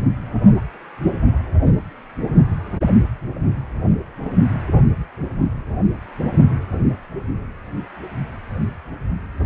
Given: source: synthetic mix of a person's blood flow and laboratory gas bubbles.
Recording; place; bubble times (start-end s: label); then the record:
Doppler ultrasound of blood flow; precordium
no bubbles
From the record:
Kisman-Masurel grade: 000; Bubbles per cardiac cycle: 0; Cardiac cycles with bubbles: 0%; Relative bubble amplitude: no bubbles discernible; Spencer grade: 0 (complete lack of bubble signals)